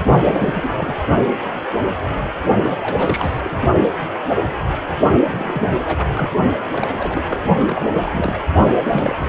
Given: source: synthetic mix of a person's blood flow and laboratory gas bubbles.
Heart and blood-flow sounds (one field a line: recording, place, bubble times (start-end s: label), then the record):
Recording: Doppler ultrasound of blood flow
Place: precordium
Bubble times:
0.22-1.00 s: bubbles
2.62-2.73 s: bubbles
2.78-3.41 s: bubbles
3.44-3.60 s: bubbles
5.27-5.79 s: bubbles
5.86-6.03 s: bubbles
6.16-6.29 s: bubbles
6.71-7.24 s: bubbles
7.27-7.38 s: bubbles
7.62-7.89 s: bubbles
7.94-8.41 s: bubbles
8.89-9.15 s: bubbles
9.19-9.28 s: bubbles
From the record:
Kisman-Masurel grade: 332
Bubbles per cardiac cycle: rolling drumbeat, 9 or more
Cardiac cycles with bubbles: 50 to 99%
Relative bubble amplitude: moderate (0.250 to 0.450)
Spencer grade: 3 (all of the cardiac periods contain showers or single bubble signals, but not dominating or overriding the cardiac motion signals)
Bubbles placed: only in the low amplitude regions of the cardiac cycle